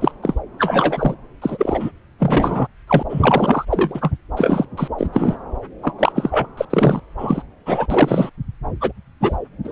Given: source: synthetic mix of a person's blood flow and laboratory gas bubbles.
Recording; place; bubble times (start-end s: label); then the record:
Doppler ultrasound of blood flow; subclavian vein
0.01-0.12 s: bubbles
0.23-0.34 s: bubbles
0.58-1.15 s: bubbles
1.42-1.91 s: bubbles
2.19-2.67 s: bubbles
2.88-3.03 s: bubbles
3.10-3.65 s: bubbles
3.70-4.11 s: bubbles
4.36-4.66 s: bubbles
4.77-4.88 s: bubbles
4.98-5.07 s: bubbles
5.12-5.37 s: bubbles
5.82-5.93 s: bubbles
5.98-6.12 s: bubbles
6.15-6.46 s: bubbles
6.57-6.65 s: bubbles
6.70-7.00 s: bubbles
7.18-7.43 s: bubbles
7.65-7.87 s: bubbles
7.90-8.29 s: bubbles
8.80-8.92 s: bubbles
9.21-9.37 s: bubbles
9.64-9.72 s: bubbles
From the record:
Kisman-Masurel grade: 243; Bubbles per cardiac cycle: several, 3 to 8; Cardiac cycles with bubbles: 100%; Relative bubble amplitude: loud (0.450 to 0.775); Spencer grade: 3 (all of the cardiac periods contain showers or single bubble signals, but not dominating or overriding the cardiac motion signals); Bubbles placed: anywhere in the cardiac cycle